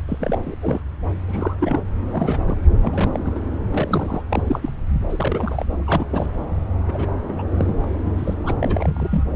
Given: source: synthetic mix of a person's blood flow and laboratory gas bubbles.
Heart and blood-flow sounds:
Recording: Doppler ultrasound of blood flow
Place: subclavian vein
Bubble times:
0.00-0.55 s: bubbles
0.61-0.80 s: bubbles
1.27-1.55 s: bubbles
1.59-1.82 s: bubbles
2.12-2.39 s: bubbles
2.46-2.57 s: bubbles
2.82-3.20 s: bubbles
3.25-3.33 s: bubbles
3.35-3.39 s: bubbles
3.71-4.23 s: bubbles
4.29-4.71 s: bubbles
5.09-5.66 s: bubbles
5.78-6.07 s: bubbles
6.10-6.28 s: bubbles
6.88-7.07 s: bubbles
7.28-7.42 s: bubbles
7.54-7.88 s: bubbles
8.04-8.34 s: bubbles
8.43-8.55 s: bubbles
8.61-9.23 s: bubbles
From the record:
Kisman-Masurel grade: 242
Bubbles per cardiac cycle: several, 3 to 8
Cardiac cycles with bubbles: 100%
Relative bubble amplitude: moderate (0.250 to 0.450)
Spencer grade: 3 (all of the cardiac periods contain showers or single bubble signals, but not dominating or overriding the cardiac motion signals)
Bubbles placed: anywhere in the cardiac cycle

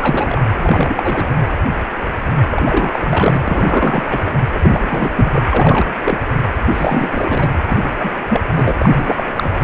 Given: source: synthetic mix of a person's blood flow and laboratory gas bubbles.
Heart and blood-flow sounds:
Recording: Doppler ultrasound of blood flow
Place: precordium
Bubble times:
0.00-0.42 s: bubbles
0.58-1.29 s: bubbles
2.51-4.06 s: bubbles
4.09-4.21 s: bubbles
4.26-4.31 s: bubbles
4.53-4.60 s: bubbles
4.63-5.94 s: bubbles
6.01-6.17 s: bubbles
6.71-7.52 s: bubbles
7.69-7.96 s: bubbles
7.99-8.09 s: bubbles
8.29-8.40 s: bubbles
8.56-8.76 s: bubbles
8.79-9.24 s: bubbles
9.36-9.56 s: bubbles
From the record:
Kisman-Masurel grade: 333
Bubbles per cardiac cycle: rolling drumbeat, 9 or more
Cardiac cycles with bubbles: 50 to 99%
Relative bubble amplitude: loud (0.450 to 0.775)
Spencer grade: 3 (all of the cardiac periods contain showers or single bubble signals, but not dominating or overriding the cardiac motion signals)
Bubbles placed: anywhere in the cardiac cycle

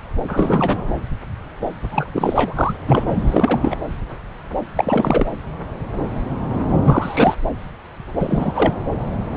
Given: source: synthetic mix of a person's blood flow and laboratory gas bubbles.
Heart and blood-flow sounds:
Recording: Doppler ultrasound of blood flow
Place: subclavian vein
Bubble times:
0.27-0.89 s: bubbles
1.91-2.08 s: bubbles
2.13-2.54 s: bubbles
2.56-2.76 s: bubbles
2.87-3.18 s: bubbles
3.27-3.77 s: bubbles
4.75-5.32 s: bubbles
6.84-7.35 s: bubbles
8.15-8.73 s: bubbles
From the record:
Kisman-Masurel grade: 333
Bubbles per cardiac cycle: rolling drumbeat, 9 or more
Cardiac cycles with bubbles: 50 to 99%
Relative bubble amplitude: loud (0.450 to 0.775)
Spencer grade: 3 (all of the cardiac periods contain showers or single bubble signals, but not dominating or overriding the cardiac motion signals)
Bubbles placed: anywhere in the cardiac cycle

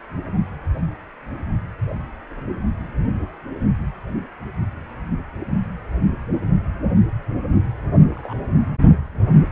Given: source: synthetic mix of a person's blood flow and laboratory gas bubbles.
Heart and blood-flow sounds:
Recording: Doppler ultrasound of blood flow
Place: precordium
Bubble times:
8.16-8.34 s: bubbles
From the record:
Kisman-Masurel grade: 111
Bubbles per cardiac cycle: 1 to 2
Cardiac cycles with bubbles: 1 to 10%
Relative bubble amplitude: barely perceptible (0.100 to 0.250)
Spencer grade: 1 (occasional bubble signal discernible with the cardiac motion signal, with majority of cardiac periods free of bubbles)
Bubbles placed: anywhere in the cardiac cycle

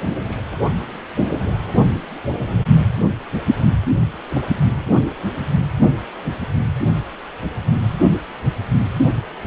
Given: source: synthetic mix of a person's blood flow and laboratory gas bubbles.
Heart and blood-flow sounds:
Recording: Doppler ultrasound of blood flow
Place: precordium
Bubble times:
0.00-0.14 s: bubbles
0.26-0.40 s: bubbles
3.98-4.18 s: bubbles
4.29-4.50 s: bubbles
From the record:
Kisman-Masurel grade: 221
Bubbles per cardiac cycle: several, 3 to 8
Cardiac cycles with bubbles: 10 to 50%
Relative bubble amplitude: barely perceptible (0.100 to 0.250)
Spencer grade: 2 (many but less than half of the cardiac periods contain bubble signals, singularly or in groups)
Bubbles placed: anywhere in the cardiac cycle

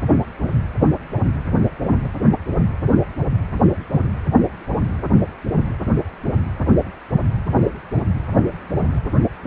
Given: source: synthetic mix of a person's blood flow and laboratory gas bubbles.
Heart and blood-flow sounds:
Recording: Doppler ultrasound of blood flow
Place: precordium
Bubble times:
no bubbles
From the record:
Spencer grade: 0 (complete lack of bubble signals)

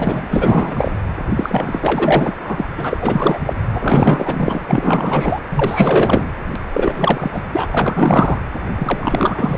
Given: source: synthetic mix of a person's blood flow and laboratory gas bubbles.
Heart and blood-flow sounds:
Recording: Doppler ultrasound of blood flow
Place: precordium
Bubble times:
0.00-0.91 s: bubbles
1.36-2.32 s: bubbles
2.40-2.65 s: bubbles
2.77-2.98 s: bubbles
3.01-3.40 s: bubbles
3.46-3.53 s: bubbles
3.72-5.40 s: bubbles
5.51-6.27 s: bubbles
6.73-7.45 s: bubbles
7.52-7.66 s: bubbles
7.71-8.39 s: bubbles
8.76-9.58 s: bubbles
From the record:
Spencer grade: 4 (maximum detectable bubble signal sounding continuously throughout systole and diastole of every cardiac period, and overriding the amplitude of the normal cardiac signals)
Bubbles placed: anywhere in the cardiac cycle

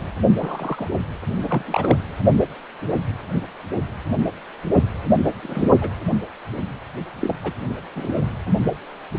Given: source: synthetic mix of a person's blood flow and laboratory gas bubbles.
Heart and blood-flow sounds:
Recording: Doppler ultrasound of blood flow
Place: precordium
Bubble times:
0.38-0.88 s: bubbles
1.42-1.97 s: bubbles
5.42-5.69 s: bubbles
5.81-5.90 s: bubbles
7.21-7.36 s: bubbles
7.44-7.54 s: bubbles
7.94-8.15 s: bubbles
From the record:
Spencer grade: 2 (many but less than half of the cardiac periods contain bubble signals, singularly or in groups)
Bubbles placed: anywhere in the cardiac cycle

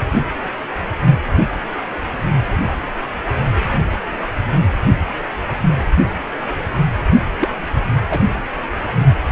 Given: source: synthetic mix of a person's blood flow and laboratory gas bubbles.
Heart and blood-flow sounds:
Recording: Doppler ultrasound of blood flow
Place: precordium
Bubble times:
7.39-7.48 s: bubbles
8.09-8.20 s: bubbles
8.87-8.94 s: bubbles
From the record:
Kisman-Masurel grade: 212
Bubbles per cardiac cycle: several, 3 to 8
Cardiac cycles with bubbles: 1 to 10%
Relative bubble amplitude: moderate (0.250 to 0.450)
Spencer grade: 1 (occasional bubble signal discernible with the cardiac motion signal, with majority of cardiac periods free of bubbles)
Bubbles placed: only in the low amplitude regions of the cardiac cycle

